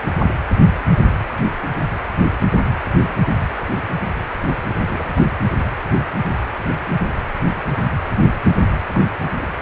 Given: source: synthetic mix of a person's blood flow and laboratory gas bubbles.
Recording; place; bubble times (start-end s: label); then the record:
Doppler ultrasound of blood flow; precordium
4.67-4.76 s: bubbles
4.79-5.25 s: bubbles
8.94-9.00 s: bubbles
9.21-9.30 s: bubbles
9.42-9.46 s: bubbles
From the record:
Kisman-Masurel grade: 221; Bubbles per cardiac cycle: several, 3 to 8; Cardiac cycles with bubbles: 10 to 50%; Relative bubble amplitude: barely perceptible (0.100 to 0.250); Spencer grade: 2 (many but less than half of the cardiac periods contain bubble signals, singularly or in groups); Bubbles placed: anywhere in the cardiac cycle